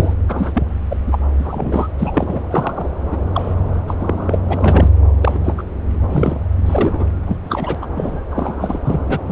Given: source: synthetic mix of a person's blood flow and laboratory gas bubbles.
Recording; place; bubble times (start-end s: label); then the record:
Doppler ultrasound of blood flow; subclavian vein
0.00-0.14 s: bubbles
0.29-0.63 s: bubbles
0.91-0.97 s: bubbles
1.06-1.18 s: bubbles
1.39-1.88 s: bubbles
1.98-2.44 s: bubbles
2.50-2.91 s: bubbles
3.12-3.17 s: bubbles
3.33-3.54 s: bubbles
3.87-4.38 s: bubbles
4.47-4.89 s: bubbles
5.21-5.39 s: bubbles
5.44-5.63 s: bubbles
6.11-6.37 s: bubbles
6.57-7.05 s: bubbles
7.26-7.37 s: bubbles
7.46-7.75 s: bubbles
7.82-7.86 s: bubbles
7.96-8.20 s: bubbles
8.30-8.77 s: bubbles
8.86-9.00 s: bubbles
9.06-9.18 s: bubbles
9.29-9.32 s: bubbles
From the record:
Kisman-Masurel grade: 243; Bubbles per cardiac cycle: several, 3 to 8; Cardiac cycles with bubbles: 100%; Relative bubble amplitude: loud (0.450 to 0.775); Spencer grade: 3 (all of the cardiac periods contain showers or single bubble signals, but not dominating or overriding the cardiac motion signals); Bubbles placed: anywhere in the cardiac cycle